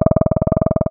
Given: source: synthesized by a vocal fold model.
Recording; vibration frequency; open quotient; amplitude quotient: sustained vowel; 20 Hz; 0.1; 1